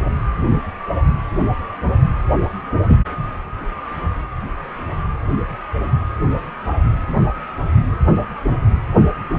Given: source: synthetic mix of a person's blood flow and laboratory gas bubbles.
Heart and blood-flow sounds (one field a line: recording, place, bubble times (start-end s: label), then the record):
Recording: Doppler ultrasound of blood flow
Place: precordium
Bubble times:
2.88-2.97 s: bubbles
From the record:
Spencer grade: 1 (occasional bubble signal discernible with the cardiac motion signal, with majority of cardiac periods free of bubbles)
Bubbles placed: anywhere in the cardiac cycle